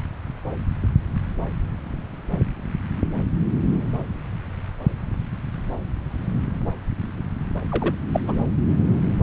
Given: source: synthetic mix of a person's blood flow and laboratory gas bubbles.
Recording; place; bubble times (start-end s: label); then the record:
Doppler ultrasound of blood flow; subclavian vein
7.69-7.95 s: bubbles
8.12-8.20 s: bubbles
8.27-8.37 s: bubbles
From the record:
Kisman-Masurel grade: 223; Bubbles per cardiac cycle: several, 3 to 8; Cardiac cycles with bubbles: 10 to 50%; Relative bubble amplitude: loud (0.450 to 0.775); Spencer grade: 2 (many but less than half of the cardiac periods contain bubble signals, singularly or in groups); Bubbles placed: anywhere in the cardiac cycle